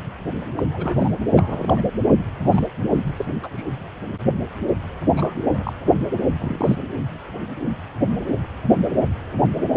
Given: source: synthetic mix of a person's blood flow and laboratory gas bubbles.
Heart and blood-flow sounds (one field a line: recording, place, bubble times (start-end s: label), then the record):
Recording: Doppler ultrasound of blood flow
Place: precordium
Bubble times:
0.56-0.68 s: bubbles
0.73-1.12 s: bubbles
1.34-1.81 s: bubbles
2.44-2.68 s: bubbles
2.94-3.04 s: bubbles
3.06-3.12 s: bubbles
3.17-3.25 s: bubbles
3.43-3.49 s: bubbles
3.57-3.63 s: bubbles
5.16-5.73 s: bubbles
6.42-6.75 s: bubbles
From the record:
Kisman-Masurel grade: 221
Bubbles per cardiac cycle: several, 3 to 8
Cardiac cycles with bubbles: 10 to 50%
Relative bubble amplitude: barely perceptible (0.100 to 0.250)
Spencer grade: 2 (many but less than half of the cardiac periods contain bubble signals, singularly or in groups)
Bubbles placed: anywhere in the cardiac cycle